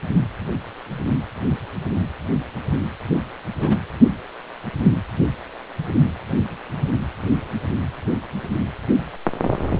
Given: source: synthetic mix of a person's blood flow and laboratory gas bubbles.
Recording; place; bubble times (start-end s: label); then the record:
Doppler ultrasound of blood flow; precordium
3.58-3.77 s: bubbles
From the record:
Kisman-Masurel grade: 113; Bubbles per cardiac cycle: 1 to 2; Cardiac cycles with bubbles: 1 to 10%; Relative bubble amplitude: loud (0.450 to 0.775); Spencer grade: 1 (occasional bubble signal discernible with the cardiac motion signal, with majority of cardiac periods free of bubbles); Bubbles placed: anywhere in the cardiac cycle